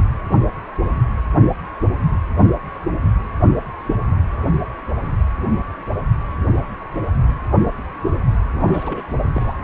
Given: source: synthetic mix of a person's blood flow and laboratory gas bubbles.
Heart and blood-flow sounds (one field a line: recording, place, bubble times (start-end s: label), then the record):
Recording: Doppler ultrasound of blood flow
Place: precordium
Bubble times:
8.54-9.03 s: bubbles
9.32-9.54 s: bubbles
From the record:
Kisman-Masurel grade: 211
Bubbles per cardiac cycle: several, 3 to 8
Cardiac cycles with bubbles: 1 to 10%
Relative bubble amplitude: barely perceptible (0.100 to 0.250)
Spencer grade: 1 (occasional bubble signal discernible with the cardiac motion signal, with majority of cardiac periods free of bubbles)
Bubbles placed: anywhere in the cardiac cycle